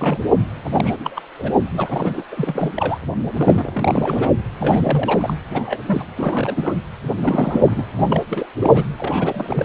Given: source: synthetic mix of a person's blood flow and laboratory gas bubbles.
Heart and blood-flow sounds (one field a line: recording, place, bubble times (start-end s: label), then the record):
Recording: Doppler ultrasound of blood flow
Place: precordium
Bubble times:
0.00-0.18 s: bubbles
0.64-0.70 s: bubbles
0.72-1.22 s: bubbles
1.38-1.48 s: bubbles
1.73-2.24 s: bubbles
2.31-2.72 s: bubbles
2.75-2.98 s: bubbles
3.36-4.29 s: bubbles
4.60-5.33 s: bubbles
5.55-5.80 s: bubbles
5.87-6.04 s: bubbles
6.16-6.74 s: bubbles
7.22-7.84 s: bubbles
7.99-8.03 s: bubbles
8.07-8.21 s: bubbles
8.29-8.46 s: bubbles
8.60-8.84 s: bubbles
8.98-9.65 s: bubbles
From the record:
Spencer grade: 3 (all of the cardiac periods contain showers or single bubble signals, but not dominating or overriding the cardiac motion signals)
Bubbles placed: anywhere in the cardiac cycle